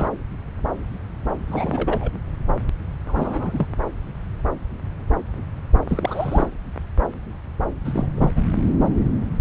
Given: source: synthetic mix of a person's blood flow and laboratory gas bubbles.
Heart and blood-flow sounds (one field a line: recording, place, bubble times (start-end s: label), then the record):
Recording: Doppler ultrasound of blood flow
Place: subclavian vein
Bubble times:
0.00-0.08 s: bubbles
1.47-2.11 s: bubbles
3.07-3.67 s: bubbles
5.79-6.46 s: bubbles
7.85-8.06 s: bubbles
8.15-8.34 s: bubbles
8.36-8.42 s: bubbles
From the record:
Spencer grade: 2 (many but less than half of the cardiac periods contain bubble signals, singularly or in groups)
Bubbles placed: anywhere in the cardiac cycle